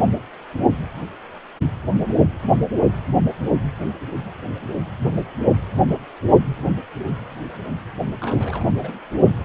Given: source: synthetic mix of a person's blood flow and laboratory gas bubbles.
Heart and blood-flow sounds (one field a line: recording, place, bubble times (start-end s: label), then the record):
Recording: Doppler ultrasound of blood flow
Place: precordium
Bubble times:
8.21-8.65 s: bubbles
8.81-8.98 s: bubbles
From the record:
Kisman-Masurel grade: 111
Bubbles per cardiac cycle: 1 to 2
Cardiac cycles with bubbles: 1 to 10%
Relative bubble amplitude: barely perceptible (0.100 to 0.250)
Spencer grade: 1 (occasional bubble signal discernible with the cardiac motion signal, with majority of cardiac periods free of bubbles)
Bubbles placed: only in the low amplitude regions of the cardiac cycle